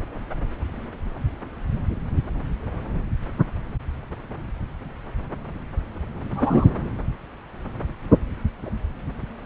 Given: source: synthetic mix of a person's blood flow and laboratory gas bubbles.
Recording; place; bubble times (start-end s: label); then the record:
Doppler ultrasound of blood flow; subclavian vein
6.31-6.75 s: bubbles
From the record:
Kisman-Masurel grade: 123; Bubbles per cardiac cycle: 1 to 2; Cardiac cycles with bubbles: 10 to 50%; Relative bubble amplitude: loud (0.450 to 0.775); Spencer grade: 2 (many but less than half of the cardiac periods contain bubble signals, singularly or in groups); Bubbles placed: anywhere in the cardiac cycle